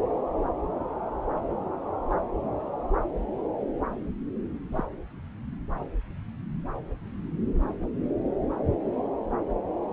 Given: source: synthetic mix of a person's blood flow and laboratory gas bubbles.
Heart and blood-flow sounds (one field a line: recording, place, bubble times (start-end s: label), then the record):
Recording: Doppler ultrasound of blood flow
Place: subclavian vein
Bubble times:
2.10-2.13 s: bubbles
4.76-4.84 s: bubbles
From the record:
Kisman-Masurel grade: 121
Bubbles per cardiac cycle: 1 to 2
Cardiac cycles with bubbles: 10 to 50%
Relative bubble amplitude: barely perceptible (0.100 to 0.250)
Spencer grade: 2 (many but less than half of the cardiac periods contain bubble signals, singularly or in groups)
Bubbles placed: anywhere in the cardiac cycle